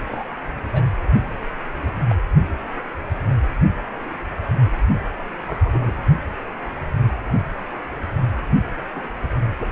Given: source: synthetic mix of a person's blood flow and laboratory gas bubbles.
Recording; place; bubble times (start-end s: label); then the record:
Doppler ultrasound of blood flow; precordium
0.06-0.24 s: bubbles
0.71-0.81 s: bubbles
2.08-2.15 s: bubbles
5.46-5.92 s: bubbles
8.96-9.00 s: bubbles
9.59-9.66 s: bubbles
From the record:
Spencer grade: 2 (many but less than half of the cardiac periods contain bubble signals, singularly or in groups); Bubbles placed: only in the low amplitude regions of the cardiac cycle